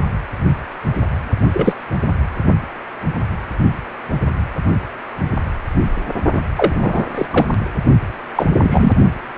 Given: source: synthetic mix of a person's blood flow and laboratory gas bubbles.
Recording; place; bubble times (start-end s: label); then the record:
Doppler ultrasound of blood flow; precordium
1.52-1.75 s: bubbles
6.34-6.41 s: bubbles
6.56-7.07 s: bubbles
7.14-7.26 s: bubbles
7.31-7.46 s: bubbles
8.35-8.46 s: bubbles
8.61-8.92 s: bubbles
From the record:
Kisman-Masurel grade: 223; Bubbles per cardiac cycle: several, 3 to 8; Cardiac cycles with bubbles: 10 to 50%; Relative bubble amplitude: loud (0.450 to 0.775); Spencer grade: 2 (many but less than half of the cardiac periods contain bubble signals, singularly or in groups); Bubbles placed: only in the low amplitude regions of the cardiac cycle